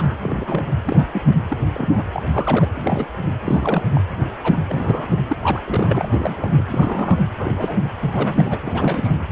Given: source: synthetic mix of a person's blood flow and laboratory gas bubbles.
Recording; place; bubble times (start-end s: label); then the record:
Doppler ultrasound of blood flow; precordium
0.00-0.65 s: bubbles
0.84-1.06 s: bubbles
1.13-1.21 s: bubbles
1.48-1.56 s: bubbles
1.73-2.04 s: bubbles
2.14-2.22 s: bubbles
2.29-2.69 s: bubbles
2.73-3.07 s: bubbles
3.46-3.83 s: bubbles
3.94-4.01 s: bubbles
4.43-4.57 s: bubbles
4.67-5.18 s: bubbles
5.27-5.36 s: bubbles
5.42-5.61 s: bubbles
5.67-6.08 s: bubbles
6.12-6.64 s: bubbles
6.69-7.18 s: bubbles
7.38-7.54 s: bubbles
7.57-7.78 s: bubbles
8.00-8.57 s: bubbles
8.64-9.15 s: bubbles
From the record:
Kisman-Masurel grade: 242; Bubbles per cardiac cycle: several, 3 to 8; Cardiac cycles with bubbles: 100%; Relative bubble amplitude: moderate (0.250 to 0.450); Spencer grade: 3 (all of the cardiac periods contain showers or single bubble signals, but not dominating or overriding the cardiac motion signals); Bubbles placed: anywhere in the cardiac cycle